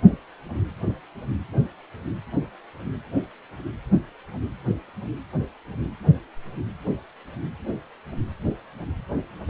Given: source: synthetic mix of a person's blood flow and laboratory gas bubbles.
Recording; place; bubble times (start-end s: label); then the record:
Doppler ultrasound of blood flow; precordium
0.10-0.18 s: bubbles
0.55-0.62 s: bubbles
5.80-5.88 s: bubbles
9.47-9.50 s: bubbles
From the record:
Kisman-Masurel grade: 121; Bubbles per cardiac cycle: 1 to 2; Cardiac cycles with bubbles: 10 to 50%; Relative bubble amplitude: barely perceptible (0.100 to 0.250); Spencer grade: 2 (many but less than half of the cardiac periods contain bubble signals, singularly or in groups); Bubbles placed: anywhere in the cardiac cycle